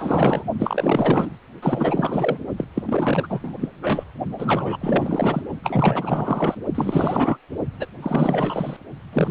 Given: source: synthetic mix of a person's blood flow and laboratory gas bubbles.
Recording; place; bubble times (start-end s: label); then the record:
Doppler ultrasound of blood flow; precordium
0.00-0.43 s: bubbles
0.59-1.30 s: bubbles
1.62-2.39 s: bubbles
2.57-2.65 s: bubbles
2.75-2.83 s: bubbles
2.86-3.71 s: bubbles
3.82-4.04 s: bubbles
4.38-4.77 s: bubbles
4.81-5.42 s: bubbles
5.63-6.55 s: bubbles
6.75-7.37 s: bubbles
7.79-7.86 s: bubbles
8.02-8.77 s: bubbles
9.12-9.31 s: bubbles
From the record:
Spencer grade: 4 (maximum detectable bubble signal sounding continuously throughout systole and diastole of every cardiac period, and overriding the amplitude of the normal cardiac signals); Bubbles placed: only in the low amplitude regions of the cardiac cycle